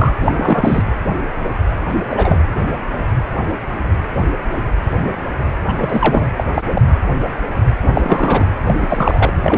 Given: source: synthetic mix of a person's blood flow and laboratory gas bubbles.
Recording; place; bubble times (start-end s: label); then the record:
Doppler ultrasound of blood flow; precordium
0.00-0.12 s: bubbles
0.18-0.83 s: bubbles
1.89-1.95 s: bubbles
2.10-2.38 s: bubbles
5.67-5.73 s: bubbles
5.77-6.28 s: bubbles
6.37-6.44 s: bubbles
6.54-6.62 s: bubbles
6.70-6.81 s: bubbles
7.93-8.48 s: bubbles
8.66-8.74 s: bubbles
8.81-9.32 s: bubbles
9.41-9.58 s: bubbles
From the record:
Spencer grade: 3 (all of the cardiac periods contain showers or single bubble signals, but not dominating or overriding the cardiac motion signals); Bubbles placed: anywhere in the cardiac cycle